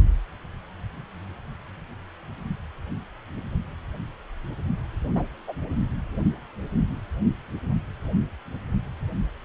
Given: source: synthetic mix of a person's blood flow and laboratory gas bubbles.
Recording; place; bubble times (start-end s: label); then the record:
Doppler ultrasound of blood flow; precordium
5.15-5.24 s: bubbles
5.47-5.54 s: bubbles
From the record:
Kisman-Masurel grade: 122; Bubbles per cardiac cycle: 1 to 2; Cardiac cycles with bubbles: 10 to 50%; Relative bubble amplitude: moderate (0.250 to 0.450); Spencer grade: 2 (many but less than half of the cardiac periods contain bubble signals, singularly or in groups); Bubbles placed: only in the low amplitude regions of the cardiac cycle